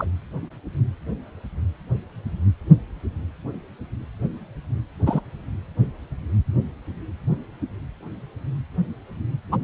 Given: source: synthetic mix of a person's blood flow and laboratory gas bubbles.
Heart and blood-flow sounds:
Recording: Doppler ultrasound of blood flow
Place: precordium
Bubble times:
0.00-0.04 s: bubbles
5.06-5.20 s: bubbles
9.52-9.56 s: bubbles
From the record:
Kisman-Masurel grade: 123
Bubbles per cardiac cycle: 1 to 2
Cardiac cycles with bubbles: 10 to 50%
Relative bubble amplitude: loud (0.450 to 0.775)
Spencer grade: 2 (many but less than half of the cardiac periods contain bubble signals, singularly or in groups)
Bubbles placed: anywhere in the cardiac cycle

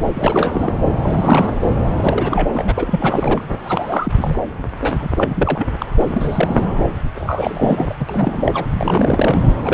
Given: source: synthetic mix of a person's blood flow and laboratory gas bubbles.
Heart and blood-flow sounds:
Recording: Doppler ultrasound of blood flow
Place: subclavian vein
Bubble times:
0.03-0.73 s: bubbles
1.02-1.59 s: bubbles
1.96-2.48 s: bubbles
2.53-2.73 s: bubbles
2.75-3.44 s: bubbles
3.64-4.12 s: bubbles
4.17-4.37 s: bubbles
4.80-5.09 s: bubbles
5.17-5.67 s: bubbles
5.78-5.86 s: bubbles
5.96-6.67 s: bubbles
7.15-7.96 s: bubbles
7.99-8.05 s: bubbles
8.08-8.65 s: bubbles
8.73-9.41 s: bubbles
9.62-9.74 s: bubbles
From the record:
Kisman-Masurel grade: 342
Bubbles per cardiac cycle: rolling drumbeat, 9 or more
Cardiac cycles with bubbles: 100%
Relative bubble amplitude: moderate (0.250 to 0.450)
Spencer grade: 3 (all of the cardiac periods contain showers or single bubble signals, but not dominating or overriding the cardiac motion signals)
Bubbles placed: anywhere in the cardiac cycle

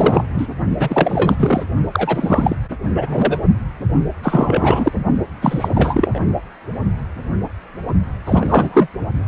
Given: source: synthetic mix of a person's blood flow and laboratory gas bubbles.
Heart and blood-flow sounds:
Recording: Doppler ultrasound of blood flow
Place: precordium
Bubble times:
0.00-0.24 s: bubbles
0.34-0.47 s: bubbles
0.78-1.64 s: bubbles
1.92-2.56 s: bubbles
2.94-3.40 s: bubbles
4.22-4.92 s: bubbles
5.42-6.19 s: bubbles
8.26-8.87 s: bubbles
From the record:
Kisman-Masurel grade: 333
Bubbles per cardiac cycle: rolling drumbeat, 9 or more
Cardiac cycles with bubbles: 50 to 99%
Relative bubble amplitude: loud (0.450 to 0.775)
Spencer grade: 3 (all of the cardiac periods contain showers or single bubble signals, but not dominating or overriding the cardiac motion signals)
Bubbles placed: only in the low amplitude regions of the cardiac cycle

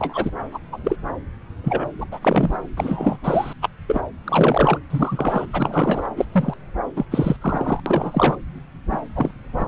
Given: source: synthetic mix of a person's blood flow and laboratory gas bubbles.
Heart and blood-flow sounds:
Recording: Doppler ultrasound of blood flow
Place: subclavian vein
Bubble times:
0.00-0.30 s: bubbles
0.52-0.59 s: bubbles
0.72-0.79 s: bubbles
0.84-0.96 s: bubbles
1.64-1.85 s: bubbles
1.98-2.07 s: bubbles
2.12-2.56 s: bubbles
2.77-3.18 s: bubbles
3.24-3.53 s: bubbles
3.62-3.69 s: bubbles
3.88-4.00 s: bubbles
4.24-4.78 s: bubbles
4.90-5.46 s: bubbles
5.53-6.10 s: bubbles
6.17-6.25 s: bubbles
6.31-6.54 s: bubbles
6.96-7.05 s: bubbles
7.11-7.36 s: bubbles
7.41-7.80 s: bubbles
7.86-8.36 s: bubbles
8.91-9.00 s: bubbles
9.15-9.31 s: bubbles
9.57-9.65 s: bubbles
From the record:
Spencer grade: 3 (all of the cardiac periods contain showers or single bubble signals, but not dominating or overriding the cardiac motion signals)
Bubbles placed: anywhere in the cardiac cycle

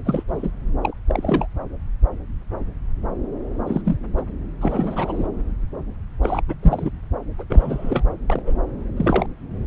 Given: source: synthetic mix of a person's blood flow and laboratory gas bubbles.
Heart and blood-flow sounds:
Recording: Doppler ultrasound of blood flow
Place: subclavian vein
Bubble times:
0.04-0.23 s: bubbles
0.28-0.51 s: bubbles
0.83-0.94 s: bubbles
1.08-1.47 s: bubbles
3.67-3.81 s: bubbles
3.85-3.97 s: bubbles
4.17-4.21 s: bubbles
4.61-5.27 s: bubbles
6.22-6.42 s: bubbles
6.47-6.54 s: bubbles
6.62-6.90 s: bubbles
7.38-7.44 s: bubbles
7.49-8.04 s: bubbles
8.28-8.42 s: bubbles
8.46-8.53 s: bubbles
8.96-9.26 s: bubbles
From the record:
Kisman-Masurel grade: 232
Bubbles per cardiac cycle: several, 3 to 8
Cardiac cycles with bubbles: 50 to 99%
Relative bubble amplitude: moderate (0.250 to 0.450)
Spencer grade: 3 (all of the cardiac periods contain showers or single bubble signals, but not dominating or overriding the cardiac motion signals)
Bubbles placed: anywhere in the cardiac cycle

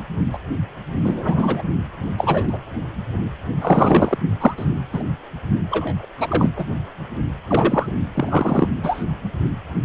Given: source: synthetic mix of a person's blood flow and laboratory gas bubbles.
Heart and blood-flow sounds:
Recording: Doppler ultrasound of blood flow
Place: precordium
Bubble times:
0.33-0.38 s: bubbles
1.03-1.62 s: bubbles
2.18-2.58 s: bubbles
3.61-4.18 s: bubbles
4.40-4.54 s: bubbles
4.57-4.65 s: bubbles
4.92-5.03 s: bubbles
5.70-6.06 s: bubbles
6.17-6.49 s: bubbles
6.56-6.65 s: bubbles
7.48-7.87 s: bubbles
8.14-8.67 s: bubbles
8.83-9.04 s: bubbles
From the record:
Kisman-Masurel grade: 243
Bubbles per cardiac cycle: several, 3 to 8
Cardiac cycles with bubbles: 100%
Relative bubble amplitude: loud (0.450 to 0.775)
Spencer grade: 3 (all of the cardiac periods contain showers or single bubble signals, but not dominating or overriding the cardiac motion signals)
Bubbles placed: only in the low amplitude regions of the cardiac cycle

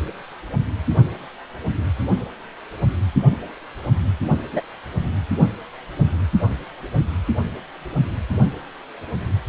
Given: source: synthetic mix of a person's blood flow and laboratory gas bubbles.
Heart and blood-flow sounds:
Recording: Doppler ultrasound of blood flow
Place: precordium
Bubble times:
4.52-4.61 s: bubbles
From the record:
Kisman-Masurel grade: 112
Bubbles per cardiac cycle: 1 to 2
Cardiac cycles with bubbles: 1 to 10%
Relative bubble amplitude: moderate (0.250 to 0.450)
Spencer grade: 1 (occasional bubble signal discernible with the cardiac motion signal, with majority of cardiac periods free of bubbles)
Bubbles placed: only in the low amplitude regions of the cardiac cycle

